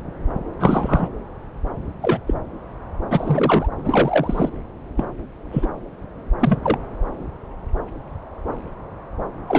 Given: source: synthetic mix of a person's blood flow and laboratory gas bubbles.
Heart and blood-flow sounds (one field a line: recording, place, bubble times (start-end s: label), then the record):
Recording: Doppler ultrasound of blood flow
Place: subclavian vein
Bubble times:
0.60-1.08 s: bubbles
2.02-2.19 s: bubbles
2.26-2.34 s: bubbles
3.10-3.69 s: bubbles
3.78-4.50 s: bubbles
4.96-5.05 s: bubbles
5.52-5.67 s: bubbles
6.40-6.59 s: bubbles
6.63-6.78 s: bubbles
9.47-9.59 s: bubbles
From the record:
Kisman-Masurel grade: 233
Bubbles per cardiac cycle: several, 3 to 8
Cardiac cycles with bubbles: 50 to 99%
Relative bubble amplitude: loud (0.450 to 0.775)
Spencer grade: 3 (all of the cardiac periods contain showers or single bubble signals, but not dominating or overriding the cardiac motion signals)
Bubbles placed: anywhere in the cardiac cycle